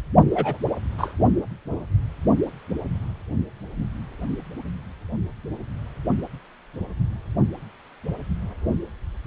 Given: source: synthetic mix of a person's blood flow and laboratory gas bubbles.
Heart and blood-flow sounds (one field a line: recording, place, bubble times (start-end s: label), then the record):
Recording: Doppler ultrasound of blood flow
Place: precordium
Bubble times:
0.32-0.57 s: bubbles
0.98-1.14 s: bubbles
From the record:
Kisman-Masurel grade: 112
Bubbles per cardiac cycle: 1 to 2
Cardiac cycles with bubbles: 1 to 10%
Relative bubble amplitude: moderate (0.250 to 0.450)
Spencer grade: 1 (occasional bubble signal discernible with the cardiac motion signal, with majority of cardiac periods free of bubbles)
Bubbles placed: only in the low amplitude regions of the cardiac cycle